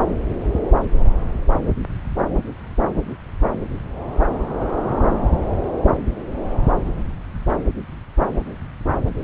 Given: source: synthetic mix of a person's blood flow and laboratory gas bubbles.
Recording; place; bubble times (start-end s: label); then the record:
Doppler ultrasound of blood flow; subclavian vein
no bubbles
From the record:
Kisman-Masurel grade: 000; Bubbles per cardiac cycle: 0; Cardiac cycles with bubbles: 0%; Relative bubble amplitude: no bubbles discernible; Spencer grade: 0 (complete lack of bubble signals)